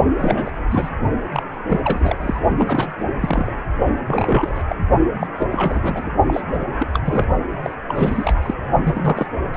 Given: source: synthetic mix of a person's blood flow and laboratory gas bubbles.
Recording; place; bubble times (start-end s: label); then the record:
Doppler ultrasound of blood flow; precordium
0.16-0.52 s: bubbles
0.67-0.89 s: bubbles
1.33-1.42 s: bubbles
1.69-2.17 s: bubbles
2.20-2.41 s: bubbles
2.57-2.92 s: bubbles
3.20-3.50 s: bubbles
4.07-4.63 s: bubbles
4.68-4.76 s: bubbles
5.14-5.27 s: bubbles
5.40-5.46 s: bubbles
5.50-6.11 s: bubbles
6.27-6.42 s: bubbles
6.54-6.65 s: bubbles
6.79-6.88 s: bubbles
6.93-6.99 s: bubbles
7.04-7.24 s: bubbles
7.62-7.74 s: bubbles
7.89-8.33 s: bubbles
8.35-8.54 s: bubbles
8.83-9.26 s: bubbles
9.53-9.57 s: bubbles
From the record:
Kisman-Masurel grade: 342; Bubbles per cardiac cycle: rolling drumbeat, 9 or more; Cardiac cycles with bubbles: 100%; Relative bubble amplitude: moderate (0.250 to 0.450); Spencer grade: 3 (all of the cardiac periods contain showers or single bubble signals, but not dominating or overriding the cardiac motion signals); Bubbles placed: only in the low amplitude regions of the cardiac cycle